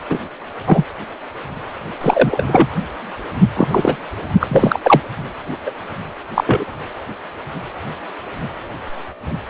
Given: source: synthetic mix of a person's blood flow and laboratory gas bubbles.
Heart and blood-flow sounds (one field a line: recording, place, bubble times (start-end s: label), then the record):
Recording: Doppler ultrasound of blood flow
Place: precordium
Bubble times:
0.09-0.19 s: bubbles
0.66-0.85 s: bubbles
2.00-2.44 s: bubbles
2.46-2.67 s: bubbles
3.55-3.68 s: bubbles
3.71-3.96 s: bubbles
4.40-4.79 s: bubbles
4.83-5.00 s: bubbles
5.66-5.70 s: bubbles
6.34-6.65 s: bubbles
From the record:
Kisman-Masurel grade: 233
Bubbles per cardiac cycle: several, 3 to 8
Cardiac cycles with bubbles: 50 to 99%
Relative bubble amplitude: loud (0.450 to 0.775)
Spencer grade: 3 (all of the cardiac periods contain showers or single bubble signals, but not dominating or overriding the cardiac motion signals)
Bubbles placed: anywhere in the cardiac cycle